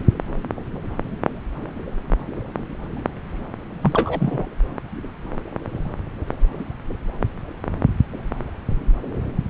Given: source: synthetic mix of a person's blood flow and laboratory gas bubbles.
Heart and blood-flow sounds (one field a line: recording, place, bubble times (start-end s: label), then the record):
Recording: Doppler ultrasound of blood flow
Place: subclavian vein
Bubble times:
3.81-4.47 s: bubbles
From the record:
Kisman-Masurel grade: 212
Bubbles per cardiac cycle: several, 3 to 8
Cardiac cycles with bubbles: 1 to 10%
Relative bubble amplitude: moderate (0.250 to 0.450)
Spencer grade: 1 (occasional bubble signal discernible with the cardiac motion signal, with majority of cardiac periods free of bubbles)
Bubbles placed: anywhere in the cardiac cycle